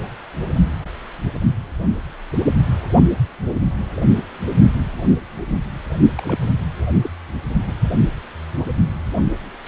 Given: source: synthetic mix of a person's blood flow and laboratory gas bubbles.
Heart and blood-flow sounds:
Doppler ultrasound of blood flow; precordium
6.18-6.49 s: bubbles
6.94-7.11 s: bubbles
7.67-7.72 s: bubbles
From the record:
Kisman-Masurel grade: 211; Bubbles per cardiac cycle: several, 3 to 8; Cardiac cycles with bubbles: 1 to 10%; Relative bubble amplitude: barely perceptible (0.100 to 0.250); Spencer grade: 1 (occasional bubble signal discernible with the cardiac motion signal, with majority of cardiac periods free of bubbles); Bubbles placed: only in the low amplitude regions of the cardiac cycle

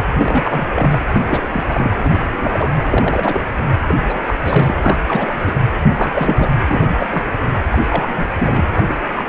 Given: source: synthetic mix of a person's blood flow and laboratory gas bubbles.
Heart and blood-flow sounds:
Doppler ultrasound of blood flow; precordium
0.00-0.03 s: bubbles
0.13-0.66 s: bubbles
0.72-0.99 s: bubbles
1.06-1.21 s: bubbles
1.26-1.47 s: bubbles
1.52-1.64 s: bubbles
1.68-1.91 s: bubbles
2.03-2.71 s: bubbles
2.85-3.41 s: bubbles
3.86-3.95 s: bubbles
4.08-4.34 s: bubbles
4.43-5.33 s: bubbles
5.46-5.52 s: bubbles
5.95-6.48 s: bubbles
6.67-7.07 s: bubbles
7.11-7.25 s: bubbles
7.71-7.79 s: bubbles
7.88-8.25 s: bubbles
8.39-8.64 s: bubbles
8.75-8.95 s: bubbles
9.16-9.25 s: bubbles
From the record:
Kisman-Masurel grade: 342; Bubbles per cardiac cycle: rolling drumbeat, 9 or more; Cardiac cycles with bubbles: 100%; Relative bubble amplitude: moderate (0.250 to 0.450); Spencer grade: 3 (all of the cardiac periods contain showers or single bubble signals, but not dominating or overriding the cardiac motion signals); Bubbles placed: anywhere in the cardiac cycle

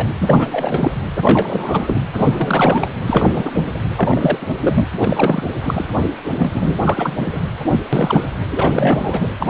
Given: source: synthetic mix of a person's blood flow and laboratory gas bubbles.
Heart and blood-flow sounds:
Doppler ultrasound of blood flow; precordium
0.00-0.07 s: bubbles
0.19-0.91 s: bubbles
1.23-2.01 s: bubbles
2.15-2.88 s: bubbles
3.06-3.65 s: bubbles
3.96-4.38 s: bubbles
4.41-4.46 s: bubbles
4.62-4.86 s: bubbles
5.00-5.43 s: bubbles
5.62-5.86 s: bubbles
6.34-6.80 s: bubbles
6.84-7.42 s: bubbles
7.70-7.79 s: bubbles
7.93-8.25 s: bubbles
8.49-9.29 s: bubbles
9.40-9.50 s: bubbles
From the record:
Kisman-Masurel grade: 342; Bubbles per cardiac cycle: rolling drumbeat, 9 or more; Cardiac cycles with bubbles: 100%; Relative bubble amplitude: moderate (0.250 to 0.450); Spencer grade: 3 (all of the cardiac periods contain showers or single bubble signals, but not dominating or overriding the cardiac motion signals); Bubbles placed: anywhere in the cardiac cycle

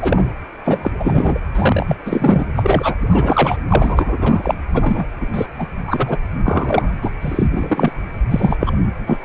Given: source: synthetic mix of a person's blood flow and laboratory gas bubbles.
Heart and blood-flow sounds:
Doppler ultrasound of blood flow; precordium
0.00-0.32 s: bubbles
0.65-0.91 s: bubbles
0.99-1.41 s: bubbles
1.54-1.97 s: bubbles
2.05-2.45 s: bubbles
2.56-2.96 s: bubbles
3.10-3.56 s: bubbles
3.69-4.54 s: bubbles
4.73-5.06 s: bubbles
5.20-5.26 s: bubbles
5.33-5.46 s: bubbles
5.58-5.67 s: bubbles
5.87-6.17 s: bubbles
6.44-6.93 s: bubbles
7.01-7.13 s: bubbles
7.21-7.47 s: bubbles
7.50-7.91 s: bubbles
8.30-8.57 s: bubbles
8.60-8.71 s: bubbles
9.06-9.17 s: bubbles
9.21-9.25 s: bubbles
From the record:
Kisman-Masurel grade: 243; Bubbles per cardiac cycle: several, 3 to 8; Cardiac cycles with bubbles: 100%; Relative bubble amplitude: loud (0.450 to 0.775); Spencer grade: 3 (all of the cardiac periods contain showers or single bubble signals, but not dominating or overriding the cardiac motion signals); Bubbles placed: anywhere in the cardiac cycle

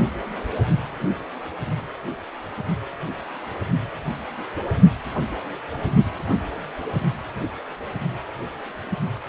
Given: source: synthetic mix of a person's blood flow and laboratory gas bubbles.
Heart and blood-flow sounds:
Doppler ultrasound of blood flow; precordium
no bubbles
From the record:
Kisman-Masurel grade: 000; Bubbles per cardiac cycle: 0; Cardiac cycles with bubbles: 0%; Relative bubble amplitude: no bubbles discernible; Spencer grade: 0 (complete lack of bubble signals)

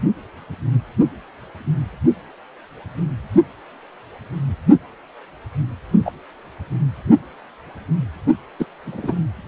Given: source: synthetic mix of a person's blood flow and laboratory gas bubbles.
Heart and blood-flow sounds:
Doppler ultrasound of blood flow; precordium
6.05-6.12 s: bubbles
8.59-8.66 s: bubbles
8.86-9.12 s: bubbles
From the record:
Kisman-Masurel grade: 123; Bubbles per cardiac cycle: 1 to 2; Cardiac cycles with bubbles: 10 to 50%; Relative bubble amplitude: loud (0.450 to 0.775); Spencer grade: 2 (many but less than half of the cardiac periods contain bubble signals, singularly or in groups); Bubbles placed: only in the low amplitude regions of the cardiac cycle

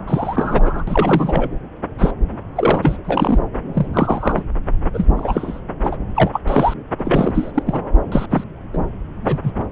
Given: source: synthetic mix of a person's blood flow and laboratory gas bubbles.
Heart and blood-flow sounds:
Doppler ultrasound of blood flow; subclavian vein
0.07-0.83 s: bubbles
0.87-1.48 s: bubbles
1.98-2.12 s: bubbles
2.56-2.79 s: bubbles
2.82-2.97 s: bubbles
3.04-3.39 s: bubbles
3.73-3.86 s: bubbles
3.93-4.43 s: bubbles
4.94-5.07 s: bubbles
5.17-5.61 s: bubbles
5.83-5.97 s: bubbles
6.15-6.41 s: bubbles
6.47-6.74 s: bubbles
6.98-7.52 s: bubbles
7.54-7.63 s: bubbles
7.66-7.80 s: bubbles
8.12-8.26 s: bubbles
8.30-8.44 s: bubbles
8.73-8.78 s: bubbles
9.24-9.40 s: bubbles
9.43-9.52 s: bubbles
From the record:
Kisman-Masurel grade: 243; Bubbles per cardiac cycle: several, 3 to 8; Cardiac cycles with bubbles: 100%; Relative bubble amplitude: loud (0.450 to 0.775); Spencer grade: 3 (all of the cardiac periods contain showers or single bubble signals, but not dominating or overriding the cardiac motion signals); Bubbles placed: anywhere in the cardiac cycle

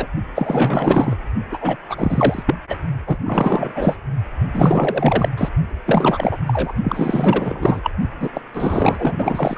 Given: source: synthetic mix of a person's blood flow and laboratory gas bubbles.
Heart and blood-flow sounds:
Doppler ultrasound of blood flow; precordium
0.00-0.07 s: bubbles
0.35-1.16 s: bubbles
1.52-1.76 s: bubbles
1.89-2.43 s: bubbles
2.46-2.54 s: bubbles
2.69-2.77 s: bubbles
3.06-3.17 s: bubbles
3.25-3.97 s: bubbles
4.54-5.28 s: bubbles
5.37-5.49 s: bubbles
5.85-6.38 s: bubbles
6.47-6.73 s: bubbles
6.83-7.81 s: bubbles
7.83-7.91 s: bubbles
8.19-8.29 s: bubbles
8.33-8.41 s: bubbles
8.54-9.57 s: bubbles
From the record:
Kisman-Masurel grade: 444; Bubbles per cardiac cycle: continuous sound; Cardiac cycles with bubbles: 100%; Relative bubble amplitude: maximal (0.775 to 0.999); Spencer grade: 4 (maximum detectable bubble signal sounding continuously throughout systole and diastole of every cardiac period, and overriding the amplitude of the normal cardiac signals); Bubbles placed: only in the low amplitude regions of the cardiac cycle

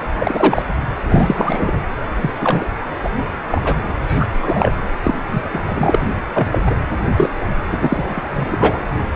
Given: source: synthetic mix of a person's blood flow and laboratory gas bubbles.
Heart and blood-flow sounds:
Doppler ultrasound of blood flow; precordium
0.18-0.63 s: bubbles
1.08-1.81 s: bubbles
2.21-2.31 s: bubbles
2.41-2.65 s: bubbles
3.02-3.08 s: bubbles
3.50-3.61 s: bubbles
3.64-3.77 s: bubbles
4.07-4.28 s: bubbles
4.42-4.72 s: bubbles
5.03-5.15 s: bubbles
5.27-5.43 s: bubbles
5.54-5.60 s: bubbles
5.65-5.99 s: bubbles
6.02-6.06 s: bubbles
6.34-6.48 s: bubbles
6.52-6.59 s: bubbles
6.66-6.77 s: bubbles
7.17-7.29 s: bubbles
7.70-8.29 s: bubbles
8.35-8.55 s: bubbles
8.59-8.87 s: bubbles
From the record:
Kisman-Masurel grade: 233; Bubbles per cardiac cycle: several, 3 to 8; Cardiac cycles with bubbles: 50 to 99%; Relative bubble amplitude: loud (0.450 to 0.775); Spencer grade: 3 (all of the cardiac periods contain showers or single bubble signals, but not dominating or overriding the cardiac motion signals); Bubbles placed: anywhere in the cardiac cycle

